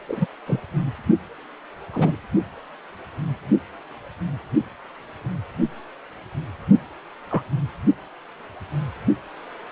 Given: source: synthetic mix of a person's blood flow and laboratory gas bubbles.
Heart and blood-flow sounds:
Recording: Doppler ultrasound of blood flow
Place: precordium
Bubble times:
0.08-0.26 s: bubbles
0.46-0.60 s: bubbles
1.93-2.17 s: bubbles
7.30-7.42 s: bubbles
From the record:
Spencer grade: 2 (many but less than half of the cardiac periods contain bubble signals, singularly or in groups)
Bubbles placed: only in the low amplitude regions of the cardiac cycle

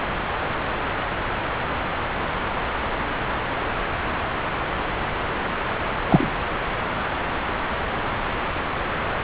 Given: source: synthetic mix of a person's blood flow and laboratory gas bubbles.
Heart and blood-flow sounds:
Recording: Doppler ultrasound of blood flow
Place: subclavian vein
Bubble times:
6.09-6.30 s: bubbles
From the record:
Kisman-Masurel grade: 113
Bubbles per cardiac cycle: 1 to 2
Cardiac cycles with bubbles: 1 to 10%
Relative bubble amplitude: loud (0.450 to 0.775)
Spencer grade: 1 (occasional bubble signal discernible with the cardiac motion signal, with majority of cardiac periods free of bubbles)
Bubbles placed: anywhere in the cardiac cycle

